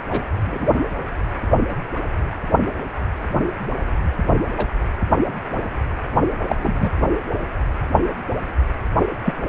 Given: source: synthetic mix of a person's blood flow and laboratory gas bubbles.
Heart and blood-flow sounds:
Doppler ultrasound of blood flow; precordium
0.10-0.27 s: bubbles
0.45-0.68 s: bubbles
4.57-4.65 s: bubbles
6.47-6.55 s: bubbles
6.59-6.96 s: bubbles
9.25-9.34 s: bubbles
From the record:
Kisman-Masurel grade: 122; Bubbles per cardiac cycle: 1 to 2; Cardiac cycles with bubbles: 10 to 50%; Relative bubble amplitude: moderate (0.250 to 0.450); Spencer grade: 2 (many but less than half of the cardiac periods contain bubble signals, singularly or in groups); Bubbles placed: anywhere in the cardiac cycle

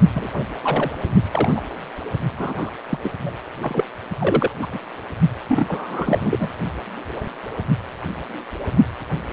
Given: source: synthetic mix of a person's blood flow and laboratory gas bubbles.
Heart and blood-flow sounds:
Doppler ultrasound of blood flow; precordium
0.15-0.30 s: bubbles
0.36-0.44 s: bubbles
0.61-0.91 s: bubbles
1.31-1.62 s: bubbles
2.39-2.70 s: bubbles
2.90-2.98 s: bubbles
3.03-3.12 s: bubbles
3.25-3.31 s: bubbles
3.61-3.84 s: bubbles
4.20-4.52 s: bubbles
4.62-4.67 s: bubbles
4.71-4.79 s: bubbles
5.48-6.54 s: bubbles
From the record:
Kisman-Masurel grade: 232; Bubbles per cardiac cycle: several, 3 to 8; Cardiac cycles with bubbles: 50 to 99%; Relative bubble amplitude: moderate (0.250 to 0.450); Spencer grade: 3 (all of the cardiac periods contain showers or single bubble signals, but not dominating or overriding the cardiac motion signals); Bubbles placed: only in the low amplitude regions of the cardiac cycle

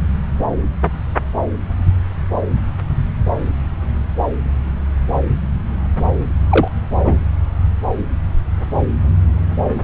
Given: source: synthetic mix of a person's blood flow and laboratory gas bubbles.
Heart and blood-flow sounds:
Doppler ultrasound of blood flow; subclavian vein
6.50-6.68 s: bubbles
7.04-7.20 s: bubbles
From the record:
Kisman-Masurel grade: 113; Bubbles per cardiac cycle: 1 to 2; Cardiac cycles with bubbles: 1 to 10%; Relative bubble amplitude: loud (0.450 to 0.775); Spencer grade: 1 (occasional bubble signal discernible with the cardiac motion signal, with majority of cardiac periods free of bubbles); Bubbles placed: anywhere in the cardiac cycle

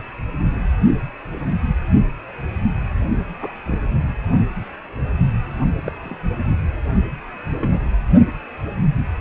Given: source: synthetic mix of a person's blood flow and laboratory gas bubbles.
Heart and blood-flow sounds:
Doppler ultrasound of blood flow; precordium
3.39-3.54 s: bubbles
3.65-3.79 s: bubbles
5.85-5.92 s: bubbles
6.04-6.17 s: bubbles
7.48-7.80 s: bubbles
From the record:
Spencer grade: 2 (many but less than half of the cardiac periods contain bubble signals, singularly or in groups); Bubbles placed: only in the low amplitude regions of the cardiac cycle

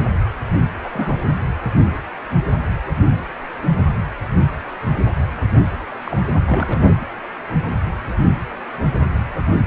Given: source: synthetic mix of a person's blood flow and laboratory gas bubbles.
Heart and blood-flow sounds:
Doppler ultrasound of blood flow; precordium
0.00-0.02 s: bubbles
0.84-1.17 s: bubbles
5.87-5.91 s: bubbles
6.05-6.20 s: bubbles
6.46-6.96 s: bubbles
9.64-9.66 s: bubbles
From the record:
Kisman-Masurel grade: 221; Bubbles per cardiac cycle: several, 3 to 8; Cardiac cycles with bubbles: 10 to 50%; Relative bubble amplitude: barely perceptible (0.100 to 0.250); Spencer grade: 2 (many but less than half of the cardiac periods contain bubble signals, singularly or in groups); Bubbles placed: anywhere in the cardiac cycle

